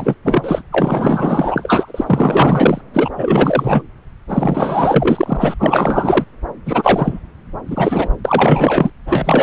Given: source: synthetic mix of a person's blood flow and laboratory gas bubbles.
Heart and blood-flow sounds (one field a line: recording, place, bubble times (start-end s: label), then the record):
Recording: Doppler ultrasound of blood flow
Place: subclavian vein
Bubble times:
0.00-0.15 s: bubbles
0.24-0.62 s: bubbles
0.72-2.81 s: bubbles
2.94-3.10 s: bubbles
3.17-3.82 s: bubbles
4.29-5.55 s: bubbles
5.59-6.24 s: bubbles
6.65-7.20 s: bubbles
7.67-8.09 s: bubbles
8.24-8.90 s: bubbles
9.07-9.43 s: bubbles
From the record:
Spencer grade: 4 (maximum detectable bubble signal sounding continuously throughout systole and diastole of every cardiac period, and overriding the amplitude of the normal cardiac signals)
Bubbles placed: anywhere in the cardiac cycle